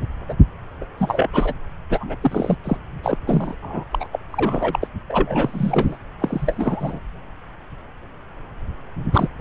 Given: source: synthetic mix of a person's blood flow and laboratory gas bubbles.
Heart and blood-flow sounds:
Doppler ultrasound of blood flow; subclavian vein
0.28-0.35 s: bubbles
0.81-0.84 s: bubbles
0.98-1.30 s: bubbles
1.33-1.54 s: bubbles
1.90-2.17 s: bubbles
2.21-2.58 s: bubbles
2.64-2.77 s: bubbles
3.03-3.18 s: bubbles
3.27-3.55 s: bubbles
3.62-3.85 s: bubbles
3.91-4.08 s: bubbles
4.12-4.20 s: bubbles
4.31-4.88 s: bubbles
5.09-5.98 s: bubbles
6.20-6.99 s: bubbles
9.12-9.28 s: bubbles
9.39-9.41 s: bubbles
From the record:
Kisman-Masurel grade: 332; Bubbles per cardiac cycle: rolling drumbeat, 9 or more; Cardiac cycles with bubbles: 50 to 99%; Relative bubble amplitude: moderate (0.250 to 0.450); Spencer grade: 3 (all of the cardiac periods contain showers or single bubble signals, but not dominating or overriding the cardiac motion signals); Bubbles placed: anywhere in the cardiac cycle

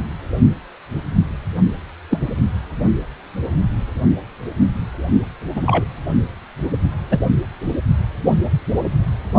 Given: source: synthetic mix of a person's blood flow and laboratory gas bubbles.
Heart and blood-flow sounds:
Doppler ultrasound of blood flow; precordium
2.10-2.19 s: bubbles
5.54-5.84 s: bubbles
7.10-7.20 s: bubbles
From the record:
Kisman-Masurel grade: 123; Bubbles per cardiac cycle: 1 to 2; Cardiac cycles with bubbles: 10 to 50%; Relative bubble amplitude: loud (0.450 to 0.775); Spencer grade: 2 (many but less than half of the cardiac periods contain bubble signals, singularly or in groups); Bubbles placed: only in the low amplitude regions of the cardiac cycle

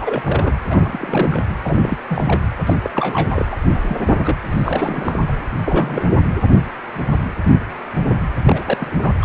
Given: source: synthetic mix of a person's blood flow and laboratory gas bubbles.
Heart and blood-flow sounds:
Doppler ultrasound of blood flow; precordium
0.00-0.22 s: bubbles
0.24-0.53 s: bubbles
0.70-1.42 s: bubbles
1.64-1.97 s: bubbles
2.08-2.41 s: bubbles
2.66-2.75 s: bubbles
2.82-3.46 s: bubbles
3.50-3.57 s: bubbles
3.63-3.96 s: bubbles
4.00-4.36 s: bubbles
4.50-5.20 s: bubbles
5.27-5.33 s: bubbles
5.65-6.04 s: bubbles
6.08-6.17 s: bubbles
8.46-9.16 s: bubbles
9.21-9.25 s: bubbles
From the record:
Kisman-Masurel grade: 332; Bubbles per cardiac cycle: rolling drumbeat, 9 or more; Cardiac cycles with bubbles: 50 to 99%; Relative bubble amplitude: moderate (0.250 to 0.450); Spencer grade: 3 (all of the cardiac periods contain showers or single bubble signals, but not dominating or overriding the cardiac motion signals); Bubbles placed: anywhere in the cardiac cycle

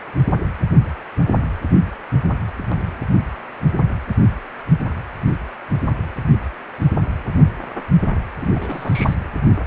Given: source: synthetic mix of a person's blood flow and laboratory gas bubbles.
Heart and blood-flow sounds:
Doppler ultrasound of blood flow; precordium
8.37-8.51 s: bubbles
8.54-9.15 s: bubbles
From the record:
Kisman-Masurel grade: 211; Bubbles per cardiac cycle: several, 3 to 8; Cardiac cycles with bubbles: 1 to 10%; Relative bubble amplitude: barely perceptible (0.100 to 0.250); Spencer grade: 1 (occasional bubble signal discernible with the cardiac motion signal, with majority of cardiac periods free of bubbles); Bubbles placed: anywhere in the cardiac cycle

